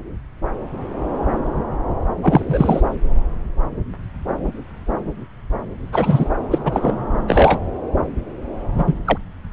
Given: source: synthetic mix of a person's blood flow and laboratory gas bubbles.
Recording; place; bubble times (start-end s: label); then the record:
Doppler ultrasound of blood flow; subclavian vein
2.22-2.81 s: bubbles
5.92-6.28 s: bubbles
6.50-6.59 s: bubbles
6.64-6.98 s: bubbles
7.27-7.59 s: bubbles
8.78-8.95 s: bubbles
9.05-9.18 s: bubbles
From the record:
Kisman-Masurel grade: 233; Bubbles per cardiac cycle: several, 3 to 8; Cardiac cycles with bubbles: 50 to 99%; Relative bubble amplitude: loud (0.450 to 0.775); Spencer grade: 3 (all of the cardiac periods contain showers or single bubble signals, but not dominating or overriding the cardiac motion signals); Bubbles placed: anywhere in the cardiac cycle